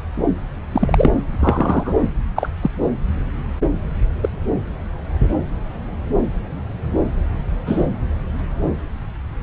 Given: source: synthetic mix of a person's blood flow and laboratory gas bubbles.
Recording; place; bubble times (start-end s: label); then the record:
Doppler ultrasound of blood flow; subclavian vein
0.73-1.10 s: bubbles
1.40-1.93 s: bubbles
2.36-2.49 s: bubbles
2.61-2.71 s: bubbles
4.22-4.29 s: bubbles
7.66-7.87 s: bubbles
From the record:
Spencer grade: 2 (many but less than half of the cardiac periods contain bubble signals, singularly or in groups); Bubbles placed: anywhere in the cardiac cycle